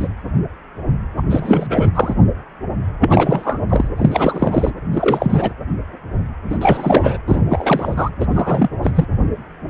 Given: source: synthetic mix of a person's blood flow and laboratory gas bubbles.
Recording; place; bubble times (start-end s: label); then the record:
Doppler ultrasound of blood flow; precordium
0.00-0.08 s: bubbles
1.17-1.22 s: bubbles
1.28-1.91 s: bubbles
1.95-2.14 s: bubbles
3.01-3.60 s: bubbles
3.69-3.88 s: bubbles
3.98-4.71 s: bubbles
4.91-5.54 s: bubbles
6.50-6.58 s: bubbles
6.61-7.18 s: bubbles
7.28-7.41 s: bubbles
7.49-8.09 s: bubbles
8.19-8.26 s: bubbles
8.30-8.69 s: bubbles
8.82-8.91 s: bubbles
8.94-9.06 s: bubbles
From the record:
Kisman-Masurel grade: 333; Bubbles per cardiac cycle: rolling drumbeat, 9 or more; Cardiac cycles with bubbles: 50 to 99%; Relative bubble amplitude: loud (0.450 to 0.775); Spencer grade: 3 (all of the cardiac periods contain showers or single bubble signals, but not dominating or overriding the cardiac motion signals); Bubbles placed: anywhere in the cardiac cycle